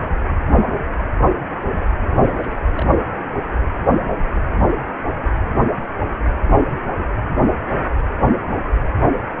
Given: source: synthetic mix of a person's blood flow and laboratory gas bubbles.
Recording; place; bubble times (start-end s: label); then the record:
Doppler ultrasound of blood flow; precordium
2.22-2.86 s: bubbles
From the record:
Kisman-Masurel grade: 111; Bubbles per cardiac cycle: 1 to 2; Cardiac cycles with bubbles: 1 to 10%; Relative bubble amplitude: barely perceptible (0.100 to 0.250); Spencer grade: 1 (occasional bubble signal discernible with the cardiac motion signal, with majority of cardiac periods free of bubbles); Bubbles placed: anywhere in the cardiac cycle